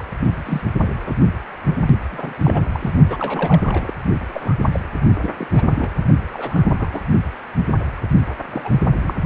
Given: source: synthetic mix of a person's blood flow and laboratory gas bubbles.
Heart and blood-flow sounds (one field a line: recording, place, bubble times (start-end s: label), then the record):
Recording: Doppler ultrasound of blood flow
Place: precordium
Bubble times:
0.00-0.05 s: bubbles
0.19-0.61 s: bubbles
0.83-0.87 s: bubbles
1.05-1.13 s: bubbles
2.10-2.33 s: bubbles
2.44-2.64 s: bubbles
2.74-2.91 s: bubbles
3.10-3.17 s: bubbles
3.20-3.94 s: bubbles
4.33-4.55 s: bubbles
4.71-4.80 s: bubbles
5.21-5.33 s: bubbles
5.37-5.47 s: bubbles
5.51-5.68 s: bubbles
5.71-5.91 s: bubbles
6.33-6.89 s: bubbles
6.93-7.02 s: bubbles
8.51-8.79 s: bubbles
9.01-9.13 s: bubbles
From the record:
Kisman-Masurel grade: 242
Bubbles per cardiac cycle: several, 3 to 8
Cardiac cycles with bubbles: 100%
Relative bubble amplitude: moderate (0.250 to 0.450)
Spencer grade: 3 (all of the cardiac periods contain showers or single bubble signals, but not dominating or overriding the cardiac motion signals)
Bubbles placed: only in the low amplitude regions of the cardiac cycle